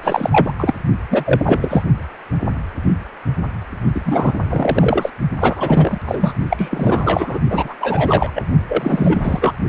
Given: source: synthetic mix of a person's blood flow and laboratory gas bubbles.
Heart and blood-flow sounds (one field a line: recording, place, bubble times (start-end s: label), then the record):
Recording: Doppler ultrasound of blood flow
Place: precordium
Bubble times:
0.03-0.52 s: bubbles
0.58-0.74 s: bubbles
1.10-1.85 s: bubbles
3.94-4.01 s: bubbles
4.06-4.40 s: bubbles
4.49-5.10 s: bubbles
5.40-5.98 s: bubbles
6.06-6.35 s: bubbles
6.50-7.40 s: bubbles
7.50-7.75 s: bubbles
7.80-8.31 s: bubbles
8.35-8.43 s: bubbles
8.68-9.53 s: bubbles
From the record:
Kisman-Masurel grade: 333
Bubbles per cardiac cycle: rolling drumbeat, 9 or more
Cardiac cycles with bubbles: 50 to 99%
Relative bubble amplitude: loud (0.450 to 0.775)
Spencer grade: 3 (all of the cardiac periods contain showers or single bubble signals, but not dominating or overriding the cardiac motion signals)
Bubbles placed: only in the low amplitude regions of the cardiac cycle